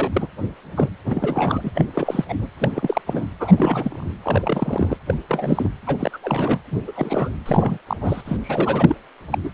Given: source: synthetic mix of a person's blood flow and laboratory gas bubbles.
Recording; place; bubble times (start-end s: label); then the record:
Doppler ultrasound of blood flow; precordium
0.00-0.28 s: bubbles
0.75-0.89 s: bubbles
1.05-1.71 s: bubbles
1.74-1.85 s: bubbles
1.94-2.25 s: bubbles
2.28-2.35 s: bubbles
2.39-2.47 s: bubbles
2.60-3.02 s: bubbles
3.06-3.27 s: bubbles
3.40-3.53 s: bubbles
3.57-4.14 s: bubbles
4.23-4.97 s: bubbles
5.07-5.14 s: bubbles
5.29-5.72 s: bubbles
5.87-6.18 s: bubbles
6.23-6.59 s: bubbles
6.71-6.79 s: bubbles
6.87-7.31 s: bubbles
7.46-7.78 s: bubbles
7.87-7.97 s: bubbles
8.01-8.21 s: bubbles
8.25-8.36 s: bubbles
8.43-8.96 s: bubbles
9.30-9.38 s: bubbles
9.43-9.49 s: bubbles
From the record:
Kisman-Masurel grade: 342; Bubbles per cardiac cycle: rolling drumbeat, 9 or more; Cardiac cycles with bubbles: 100%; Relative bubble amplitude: moderate (0.250 to 0.450); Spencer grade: 3 (all of the cardiac periods contain showers or single bubble signals, but not dominating or overriding the cardiac motion signals); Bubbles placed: anywhere in the cardiac cycle